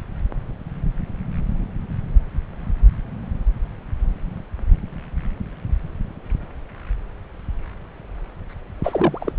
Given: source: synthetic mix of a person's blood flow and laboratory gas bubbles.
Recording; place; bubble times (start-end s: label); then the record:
Doppler ultrasound of blood flow; subclavian vein
8.84-9.33 s: bubbles
From the record:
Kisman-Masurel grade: 222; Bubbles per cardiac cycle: several, 3 to 8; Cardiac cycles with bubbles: 10 to 50%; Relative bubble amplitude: moderate (0.250 to 0.450); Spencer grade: 2 (many but less than half of the cardiac periods contain bubble signals, singularly or in groups); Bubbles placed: anywhere in the cardiac cycle